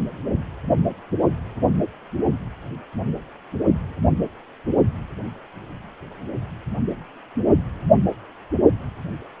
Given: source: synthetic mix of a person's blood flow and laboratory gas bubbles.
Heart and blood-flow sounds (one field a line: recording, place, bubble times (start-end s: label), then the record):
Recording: Doppler ultrasound of blood flow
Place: precordium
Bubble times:
no bubbles
From the record:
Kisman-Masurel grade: 000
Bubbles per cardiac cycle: 0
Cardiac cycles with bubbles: 0%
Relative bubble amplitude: no bubbles discernible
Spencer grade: 0 (complete lack of bubble signals)